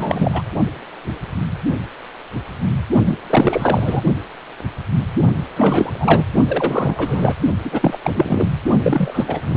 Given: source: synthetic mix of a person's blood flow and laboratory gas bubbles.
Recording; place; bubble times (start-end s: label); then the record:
Doppler ultrasound of blood flow; precordium
0.00-0.42 s: bubbles
3.05-3.18 s: bubbles
3.29-4.02 s: bubbles
5.56-5.91 s: bubbles
5.93-6.23 s: bubbles
6.47-7.36 s: bubbles
7.64-7.98 s: bubbles
8.04-8.48 s: bubbles
8.83-9.40 s: bubbles
9.49-9.57 s: bubbles
From the record:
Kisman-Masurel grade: 333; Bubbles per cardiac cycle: rolling drumbeat, 9 or more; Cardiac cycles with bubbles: 50 to 99%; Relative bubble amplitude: loud (0.450 to 0.775); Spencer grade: 3 (all of the cardiac periods contain showers or single bubble signals, but not dominating or overriding the cardiac motion signals); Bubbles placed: only in the low amplitude regions of the cardiac cycle